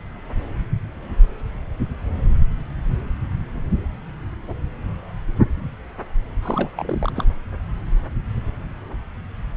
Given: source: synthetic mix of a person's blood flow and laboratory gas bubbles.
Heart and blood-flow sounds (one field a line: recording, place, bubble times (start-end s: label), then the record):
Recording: Doppler ultrasound of blood flow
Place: subclavian vein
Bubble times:
6.42-6.69 s: bubbles
6.76-7.12 s: bubbles
7.15-7.25 s: bubbles
From the record:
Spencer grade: 1 (occasional bubble signal discernible with the cardiac motion signal, with majority of cardiac periods free of bubbles)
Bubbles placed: anywhere in the cardiac cycle